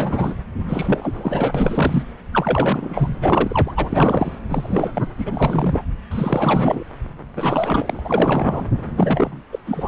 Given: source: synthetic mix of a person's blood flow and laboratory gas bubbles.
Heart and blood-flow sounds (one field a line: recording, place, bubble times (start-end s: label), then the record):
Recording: Doppler ultrasound of blood flow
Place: subclavian vein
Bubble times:
0.00-0.33 s: bubbles
0.68-2.04 s: bubbles
2.33-3.14 s: bubbles
3.21-3.72 s: bubbles
3.76-4.39 s: bubbles
4.49-5.04 s: bubbles
5.17-5.82 s: bubbles
6.11-6.83 s: bubbles
7.35-8.02 s: bubbles
8.04-8.67 s: bubbles
8.96-9.42 s: bubbles
9.52-9.59 s: bubbles
9.66-9.88 s: bubbles
From the record:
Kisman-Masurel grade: 342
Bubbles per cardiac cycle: rolling drumbeat, 9 or more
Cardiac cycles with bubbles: 100%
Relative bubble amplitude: moderate (0.250 to 0.450)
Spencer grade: 3 (all of the cardiac periods contain showers or single bubble signals, but not dominating or overriding the cardiac motion signals)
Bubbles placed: anywhere in the cardiac cycle